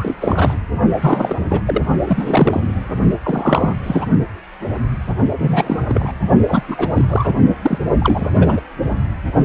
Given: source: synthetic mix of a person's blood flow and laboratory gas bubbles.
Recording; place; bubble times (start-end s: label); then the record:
Doppler ultrasound of blood flow; precordium
0.00-0.15 s: bubbles
0.21-0.56 s: bubbles
1.02-1.35 s: bubbles
1.48-1.62 s: bubbles
1.66-1.82 s: bubbles
2.05-2.73 s: bubbles
3.23-3.76 s: bubbles
3.83-4.08 s: bubbles
5.38-5.82 s: bubbles
5.88-6.11 s: bubbles
6.47-6.63 s: bubbles
6.67-7.05 s: bubbles
7.08-7.33 s: bubbles
7.62-7.79 s: bubbles
7.99-8.61 s: bubbles
From the record:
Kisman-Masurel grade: 333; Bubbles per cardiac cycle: rolling drumbeat, 9 or more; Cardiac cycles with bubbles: 50 to 99%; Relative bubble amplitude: loud (0.450 to 0.775); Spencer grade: 3 (all of the cardiac periods contain showers or single bubble signals, but not dominating or overriding the cardiac motion signals); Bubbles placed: only in the low amplitude regions of the cardiac cycle